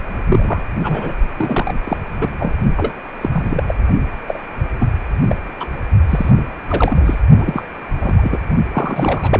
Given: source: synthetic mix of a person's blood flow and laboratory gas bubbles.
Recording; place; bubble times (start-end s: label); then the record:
Doppler ultrasound of blood flow; precordium
0.29-0.61 s: bubbles
0.82-1.18 s: bubbles
1.38-1.74 s: bubbles
1.84-1.97 s: bubbles
2.21-2.28 s: bubbles
2.39-2.53 s: bubbles
2.76-2.92 s: bubbles
3.21-3.29 s: bubbles
3.32-3.63 s: bubbles
3.67-3.74 s: bubbles
4.28-4.41 s: bubbles
4.73-4.86 s: bubbles
5.29-5.35 s: bubbles
5.60-5.67 s: bubbles
6.10-6.31 s: bubbles
6.69-7.20 s: bubbles
7.38-7.64 s: bubbles
8.00-8.39 s: bubbles
8.72-9.40 s: bubbles
From the record:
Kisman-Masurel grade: 232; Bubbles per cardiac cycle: several, 3 to 8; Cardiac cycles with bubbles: 50 to 99%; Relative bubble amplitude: moderate (0.250 to 0.450); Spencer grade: 3 (all of the cardiac periods contain showers or single bubble signals, but not dominating or overriding the cardiac motion signals); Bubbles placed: only in the low amplitude regions of the cardiac cycle